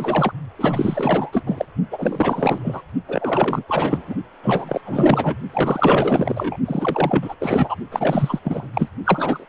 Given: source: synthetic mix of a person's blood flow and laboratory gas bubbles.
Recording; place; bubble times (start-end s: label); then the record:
Doppler ultrasound of blood flow; precordium
0.00-0.33 s: bubbles
0.58-1.44 s: bubbles
1.46-1.65 s: bubbles
1.91-2.82 s: bubbles
3.08-3.64 s: bubbles
3.68-4.14 s: bubbles
4.42-4.81 s: bubbles
4.85-5.37 s: bubbles
5.50-6.57 s: bubbles
6.65-7.35 s: bubbles
7.39-7.76 s: bubbles
7.91-8.39 s: bubbles
8.44-8.68 s: bubbles
8.73-8.88 s: bubbles
9.04-9.46 s: bubbles
From the record:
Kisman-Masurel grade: 444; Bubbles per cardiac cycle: continuous sound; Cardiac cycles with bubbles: 100%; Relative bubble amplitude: maximal (0.775 to 0.999); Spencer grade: 4 (maximum detectable bubble signal sounding continuously throughout systole and diastole of every cardiac period, and overriding the amplitude of the normal cardiac signals); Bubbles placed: only in the low amplitude regions of the cardiac cycle